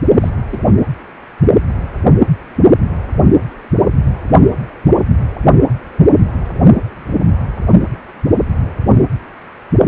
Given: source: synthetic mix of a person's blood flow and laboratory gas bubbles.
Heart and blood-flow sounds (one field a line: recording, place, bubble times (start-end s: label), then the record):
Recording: Doppler ultrasound of blood flow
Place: precordium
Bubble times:
0.21-0.30 s: bubbles
0.50-0.58 s: bubbles
8.90-9.08 s: bubbles
From the record:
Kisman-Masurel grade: 122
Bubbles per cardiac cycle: 1 to 2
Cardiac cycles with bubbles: 10 to 50%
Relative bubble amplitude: moderate (0.250 to 0.450)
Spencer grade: 2 (many but less than half of the cardiac periods contain bubble signals, singularly or in groups)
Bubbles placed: only in the low amplitude regions of the cardiac cycle